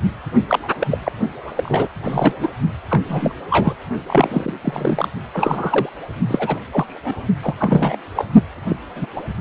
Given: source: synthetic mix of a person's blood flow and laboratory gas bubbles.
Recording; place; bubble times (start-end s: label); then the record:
Doppler ultrasound of blood flow; precordium
0.49-0.59 s: bubbles
0.80-0.88 s: bubbles
0.91-0.99 s: bubbles
1.03-1.12 s: bubbles
1.55-1.88 s: bubbles
2.04-2.33 s: bubbles
2.39-2.48 s: bubbles
2.90-3.01 s: bubbles
3.08-3.35 s: bubbles
3.50-3.74 s: bubbles
4.06-4.54 s: bubbles
4.61-5.08 s: bubbles
5.33-5.89 s: bubbles
6.28-6.59 s: bubbles
6.71-7.20 s: bubbles
7.42-7.54 s: bubbles
7.58-7.97 s: bubbles
8.15-8.25 s: bubbles
8.69-8.77 s: bubbles
8.96-9.06 s: bubbles
9.15-9.23 s: bubbles
From the record:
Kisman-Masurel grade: 242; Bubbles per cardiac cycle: several, 3 to 8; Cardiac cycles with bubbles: 100%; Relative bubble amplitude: moderate (0.250 to 0.450); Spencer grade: 3 (all of the cardiac periods contain showers or single bubble signals, but not dominating or overriding the cardiac motion signals); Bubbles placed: only in the low amplitude regions of the cardiac cycle